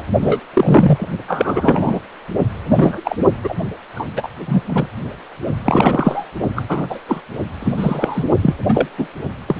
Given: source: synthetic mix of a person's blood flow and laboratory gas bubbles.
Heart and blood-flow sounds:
Doppler ultrasound of blood flow; precordium
0.00-0.04 s: bubbles
0.21-0.40 s: bubbles
0.54-1.07 s: bubbles
1.27-2.00 s: bubbles
2.65-3.02 s: bubbles
3.04-3.17 s: bubbles
3.43-3.54 s: bubbles
3.94-4.06 s: bubbles
4.17-4.29 s: bubbles
4.48-4.61 s: bubbles
4.66-4.88 s: bubbles
5.65-6.26 s: bubbles
6.55-6.62 s: bubbles
6.68-6.86 s: bubbles
6.90-6.98 s: bubbles
7.08-7.21 s: bubbles
7.60-8.24 s: bubbles
8.42-8.54 s: bubbles
8.69-8.88 s: bubbles
8.98-9.08 s: bubbles
9.46-9.55 s: bubbles
From the record:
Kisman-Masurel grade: 243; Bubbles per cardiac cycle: several, 3 to 8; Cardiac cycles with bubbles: 100%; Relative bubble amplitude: loud (0.450 to 0.775); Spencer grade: 3 (all of the cardiac periods contain showers or single bubble signals, but not dominating or overriding the cardiac motion signals); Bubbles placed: only in the low amplitude regions of the cardiac cycle

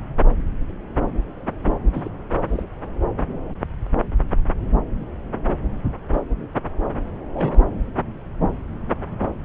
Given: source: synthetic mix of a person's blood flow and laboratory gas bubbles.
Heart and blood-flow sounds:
Doppler ultrasound of blood flow; subclavian vein
1.64-1.74 s: bubbles
1.93-2.09 s: bubbles
2.48-2.62 s: bubbles
7.33-7.65 s: bubbles
From the record:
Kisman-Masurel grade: 122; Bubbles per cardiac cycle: 1 to 2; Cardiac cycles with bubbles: 10 to 50%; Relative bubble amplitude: moderate (0.250 to 0.450); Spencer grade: 2 (many but less than half of the cardiac periods contain bubble signals, singularly or in groups); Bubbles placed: anywhere in the cardiac cycle

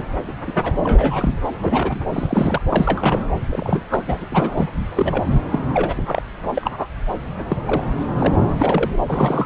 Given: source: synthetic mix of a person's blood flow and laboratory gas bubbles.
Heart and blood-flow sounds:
Doppler ultrasound of blood flow; subclavian vein
0.00-0.04 s: bubbles
0.27-0.33 s: bubbles
0.47-0.52 s: bubbles
0.63-0.72 s: bubbles
0.84-1.36 s: bubbles
1.44-1.50 s: bubbles
1.61-2.02 s: bubbles
2.12-2.62 s: bubbles
2.70-3.20 s: bubbles
3.49-3.83 s: bubbles
3.88-4.27 s: bubbles
4.30-4.71 s: bubbles
4.96-5.25 s: bubbles
5.52-5.59 s: bubbles
5.73-6.23 s: bubbles
6.56-6.87 s: bubbles
7.40-7.45 s: bubbles
7.48-7.57 s: bubbles
7.66-7.84 s: bubbles
8.00-8.04 s: bubbles
8.18-8.35 s: bubbles
8.54-8.98 s: bubbles
9.06-9.46 s: bubbles
From the record:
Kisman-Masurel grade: 242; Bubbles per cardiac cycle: several, 3 to 8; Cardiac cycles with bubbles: 100%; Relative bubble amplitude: moderate (0.250 to 0.450); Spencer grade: 3 (all of the cardiac periods contain showers or single bubble signals, but not dominating or overriding the cardiac motion signals); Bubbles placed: anywhere in the cardiac cycle

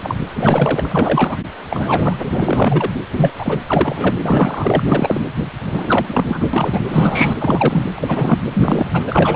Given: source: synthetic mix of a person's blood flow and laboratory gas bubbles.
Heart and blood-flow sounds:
Doppler ultrasound of blood flow; precordium
0.00-0.17 s: bubbles
0.35-1.38 s: bubbles
1.70-2.90 s: bubbles
3.12-3.31 s: bubbles
3.38-3.59 s: bubbles
3.67-4.14 s: bubbles
4.23-4.80 s: bubbles
4.86-5.21 s: bubbles
5.65-6.81 s: bubbles
6.86-7.37 s: bubbles
7.39-7.90 s: bubbles
7.95-8.38 s: bubbles
8.53-9.04 s: bubbles
9.07-9.36 s: bubbles
From the record:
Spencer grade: 3 (all of the cardiac periods contain showers or single bubble signals, but not dominating or overriding the cardiac motion signals); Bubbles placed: anywhere in the cardiac cycle

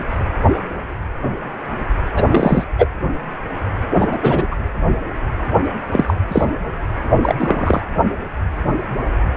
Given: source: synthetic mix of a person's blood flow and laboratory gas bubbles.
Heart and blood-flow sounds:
Doppler ultrasound of blood flow; precordium
2.14-2.64 s: bubbles
2.78-2.87 s: bubbles
3.95-4.47 s: bubbles
4.51-4.56 s: bubbles
5.91-6.14 s: bubbles
6.28-6.45 s: bubbles
7.23-7.35 s: bubbles
7.39-7.82 s: bubbles
From the record:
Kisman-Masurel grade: 223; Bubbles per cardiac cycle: several, 3 to 8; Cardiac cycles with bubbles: 10 to 50%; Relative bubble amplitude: loud (0.450 to 0.775); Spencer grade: 2 (many but less than half of the cardiac periods contain bubble signals, singularly or in groups); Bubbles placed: anywhere in the cardiac cycle

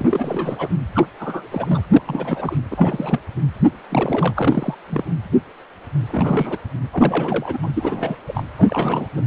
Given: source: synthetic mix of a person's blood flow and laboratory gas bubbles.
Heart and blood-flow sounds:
Doppler ultrasound of blood flow; precordium
0.00-0.68 s: bubbles
0.94-1.06 s: bubbles
1.19-1.47 s: bubbles
1.51-1.86 s: bubbles
1.92-2.02 s: bubbles
2.05-2.56 s: bubbles
2.71-3.19 s: bubbles
3.89-4.75 s: bubbles
4.89-5.04 s: bubbles
6.08-6.58 s: bubbles
6.92-7.58 s: bubbles
7.62-7.70 s: bubbles
7.73-8.17 s: bubbles
8.28-8.43 s: bubbles
8.57-9.09 s: bubbles
9.16-9.22 s: bubbles
From the record:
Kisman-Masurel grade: 332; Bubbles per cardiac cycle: rolling drumbeat, 9 or more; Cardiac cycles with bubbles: 50 to 99%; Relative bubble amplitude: moderate (0.250 to 0.450); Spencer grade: 3 (all of the cardiac periods contain showers or single bubble signals, but not dominating or overriding the cardiac motion signals); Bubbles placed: anywhere in the cardiac cycle

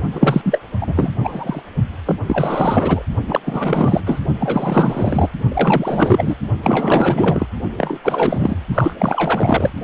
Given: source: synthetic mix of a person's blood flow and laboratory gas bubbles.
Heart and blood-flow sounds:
Doppler ultrasound of blood flow; precordium
0.12-0.58 s: bubbles
0.81-1.12 s: bubbles
1.23-1.61 s: bubbles
2.05-2.15 s: bubbles
2.26-3.04 s: bubbles
3.28-3.40 s: bubbles
3.45-4.01 s: bubbles
4.06-4.21 s: bubbles
4.40-5.29 s: bubbles
5.48-6.36 s: bubbles
6.63-7.47 s: bubbles
7.78-7.99 s: bubbles
8.04-8.55 s: bubbles
8.74-8.93 s: bubbles
8.99-9.73 s: bubbles
From the record:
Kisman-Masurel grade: 444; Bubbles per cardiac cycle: continuous sound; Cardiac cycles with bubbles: 100%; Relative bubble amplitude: maximal (0.775 to 0.999); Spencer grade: 4 (maximum detectable bubble signal sounding continuously throughout systole and diastole of every cardiac period, and overriding the amplitude of the normal cardiac signals); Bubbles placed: only in the low amplitude regions of the cardiac cycle

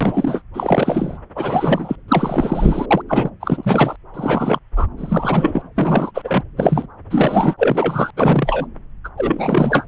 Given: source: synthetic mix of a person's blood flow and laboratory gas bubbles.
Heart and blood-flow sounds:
Doppler ultrasound of blood flow; subclavian vein
0.01-0.41 s: bubbles
0.54-1.18 s: bubbles
1.35-1.96 s: bubbles
2.08-2.86 s: bubbles
2.90-3.02 s: bubbles
3.08-3.30 s: bubbles
3.40-3.96 s: bubbles
4.14-4.59 s: bubbles
4.75-4.87 s: bubbles
4.97-5.70 s: bubbles
5.76-6.11 s: bubbles
6.14-6.41 s: bubbles
6.57-6.86 s: bubbles
7.10-7.54 s: bubbles
7.58-8.11 s: bubbles
8.16-8.67 s: bubbles
9.04-9.09 s: bubbles
9.17-9.86 s: bubbles
From the record:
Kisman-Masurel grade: 343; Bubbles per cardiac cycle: rolling drumbeat, 9 or more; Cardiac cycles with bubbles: 100%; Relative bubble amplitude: loud (0.450 to 0.775); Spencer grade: 3 (all of the cardiac periods contain showers or single bubble signals, but not dominating or overriding the cardiac motion signals); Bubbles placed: anywhere in the cardiac cycle

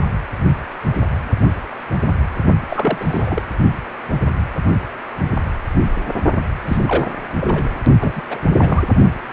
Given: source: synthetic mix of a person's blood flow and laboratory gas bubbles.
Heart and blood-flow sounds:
Doppler ultrasound of blood flow; precordium
2.69-3.42 s: bubbles
6.67-7.12 s: bubbles
7.40-7.69 s: bubbles
8.00-8.21 s: bubbles
8.30-8.42 s: bubbles
8.59-8.82 s: bubbles
From the record:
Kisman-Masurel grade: 222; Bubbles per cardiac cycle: several, 3 to 8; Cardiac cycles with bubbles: 10 to 50%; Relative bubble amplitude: moderate (0.250 to 0.450); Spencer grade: 2 (many but less than half of the cardiac periods contain bubble signals, singularly or in groups); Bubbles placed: only in the low amplitude regions of the cardiac cycle

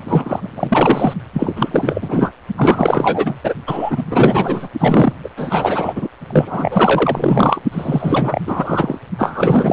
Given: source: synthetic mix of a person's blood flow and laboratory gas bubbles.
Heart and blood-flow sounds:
Doppler ultrasound of blood flow; precordium
0.05-1.13 s: bubbles
1.33-2.31 s: bubbles
2.56-3.35 s: bubbles
3.43-3.54 s: bubbles
3.67-4.04 s: bubbles
4.10-4.69 s: bubbles
4.79-5.12 s: bubbles
5.24-5.29 s: bubbles
5.37-6.08 s: bubbles
6.29-7.65 s: bubbles
7.71-8.41 s: bubbles
8.46-8.98 s: bubbles
9.18-9.73 s: bubbles
From the record:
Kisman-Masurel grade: 444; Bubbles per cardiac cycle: continuous sound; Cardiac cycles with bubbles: 100%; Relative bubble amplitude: maximal (0.775 to 0.999); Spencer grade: 4 (maximum detectable bubble signal sounding continuously throughout systole and diastole of every cardiac period, and overriding the amplitude of the normal cardiac signals); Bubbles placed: only in the low amplitude regions of the cardiac cycle

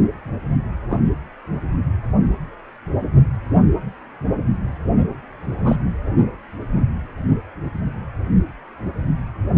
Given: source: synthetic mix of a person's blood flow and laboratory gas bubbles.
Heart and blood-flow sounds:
Doppler ultrasound of blood flow; precordium
0.89-1.00 s: bubbles
5.53-5.76 s: bubbles
From the record:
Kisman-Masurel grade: 122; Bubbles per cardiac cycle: 1 to 2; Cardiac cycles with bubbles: 10 to 50%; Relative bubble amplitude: moderate (0.250 to 0.450); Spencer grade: 2 (many but less than half of the cardiac periods contain bubble signals, singularly or in groups); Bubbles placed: anywhere in the cardiac cycle

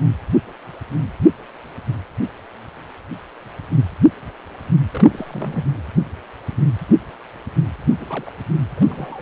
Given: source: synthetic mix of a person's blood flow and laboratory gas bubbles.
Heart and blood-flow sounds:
Doppler ultrasound of blood flow; precordium
4.91-5.65 s: bubbles
7.89-7.94 s: bubbles
8.00-8.29 s: bubbles
8.77-9.21 s: bubbles
From the record:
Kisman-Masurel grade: 221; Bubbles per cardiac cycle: several, 3 to 8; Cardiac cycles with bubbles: 10 to 50%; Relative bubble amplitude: barely perceptible (0.100 to 0.250); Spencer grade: 2 (many but less than half of the cardiac periods contain bubble signals, singularly or in groups); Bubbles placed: anywhere in the cardiac cycle

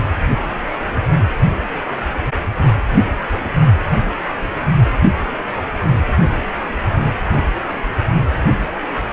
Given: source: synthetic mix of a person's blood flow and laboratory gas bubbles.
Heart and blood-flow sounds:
Doppler ultrasound of blood flow; precordium
no bubbles
From the record:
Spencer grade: 0 (complete lack of bubble signals)

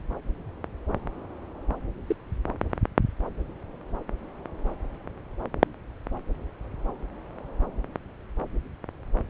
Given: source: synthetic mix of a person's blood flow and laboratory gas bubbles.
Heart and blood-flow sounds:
Doppler ultrasound of blood flow; subclavian vein
2.07-2.16 s: bubbles
From the record:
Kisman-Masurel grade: 121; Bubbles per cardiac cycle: 1 to 2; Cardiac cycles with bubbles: 10 to 50%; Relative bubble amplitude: barely perceptible (0.100 to 0.250); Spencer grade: 2 (many but less than half of the cardiac periods contain bubble signals, singularly or in groups); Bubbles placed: anywhere in the cardiac cycle

